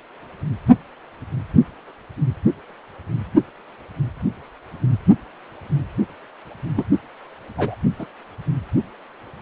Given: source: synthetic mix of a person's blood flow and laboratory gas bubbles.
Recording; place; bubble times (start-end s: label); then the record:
Doppler ultrasound of blood flow; precordium
6.76-6.84 s: bubbles
7.58-7.75 s: bubbles
7.99-8.05 s: bubbles
From the record:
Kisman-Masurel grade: 122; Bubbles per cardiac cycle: 1 to 2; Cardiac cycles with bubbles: 10 to 50%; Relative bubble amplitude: moderate (0.250 to 0.450); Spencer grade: 2 (many but less than half of the cardiac periods contain bubble signals, singularly or in groups); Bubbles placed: only in the low amplitude regions of the cardiac cycle